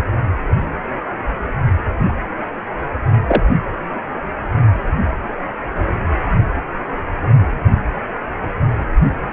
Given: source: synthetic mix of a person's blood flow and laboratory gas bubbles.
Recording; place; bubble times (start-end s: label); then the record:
Doppler ultrasound of blood flow; precordium
3.27-3.42 s: bubbles
From the record:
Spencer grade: 1 (occasional bubble signal discernible with the cardiac motion signal, with majority of cardiac periods free of bubbles); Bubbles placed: anywhere in the cardiac cycle